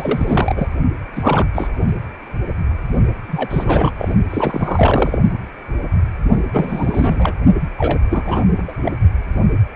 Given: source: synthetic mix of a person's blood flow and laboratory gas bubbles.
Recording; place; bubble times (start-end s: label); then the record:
Doppler ultrasound of blood flow; precordium
0.00-0.67 s: bubbles
1.16-1.46 s: bubbles
1.53-1.69 s: bubbles
3.27-3.92 s: bubbles
3.98-4.14 s: bubbles
4.30-5.17 s: bubbles
6.53-7.34 s: bubbles
7.78-8.00 s: bubbles
8.10-8.45 s: bubbles
8.58-8.62 s: bubbles
8.68-8.73 s: bubbles
8.83-8.92 s: bubbles
From the record:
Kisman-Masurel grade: 332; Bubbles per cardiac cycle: rolling drumbeat, 9 or more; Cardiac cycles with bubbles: 50 to 99%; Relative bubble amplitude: moderate (0.250 to 0.450); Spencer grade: 3 (all of the cardiac periods contain showers or single bubble signals, but not dominating or overriding the cardiac motion signals); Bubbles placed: only in the low amplitude regions of the cardiac cycle